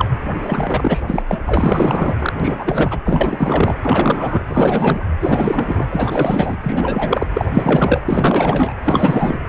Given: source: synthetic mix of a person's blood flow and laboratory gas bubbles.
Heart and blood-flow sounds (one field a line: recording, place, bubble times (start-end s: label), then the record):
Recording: Doppler ultrasound of blood flow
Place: precordium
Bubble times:
0.00-0.06 s: bubbles
0.42-1.04 s: bubbles
1.07-1.23 s: bubbles
1.27-1.39 s: bubbles
1.46-2.33 s: bubbles
2.40-2.98 s: bubbles
3.04-3.74 s: bubbles
3.80-4.44 s: bubbles
4.47-5.04 s: bubbles
5.21-5.86 s: bubbles
5.90-6.57 s: bubbles
6.63-7.27 s: bubbles
7.34-7.45 s: bubbles
7.54-8.01 s: bubbles
8.05-8.73 s: bubbles
8.84-9.41 s: bubbles
From the record:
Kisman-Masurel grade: 444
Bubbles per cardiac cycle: continuous sound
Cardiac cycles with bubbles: 100%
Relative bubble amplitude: maximal (0.775 to 0.999)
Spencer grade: 4 (maximum detectable bubble signal sounding continuously throughout systole and diastole of every cardiac period, and overriding the amplitude of the normal cardiac signals)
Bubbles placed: anywhere in the cardiac cycle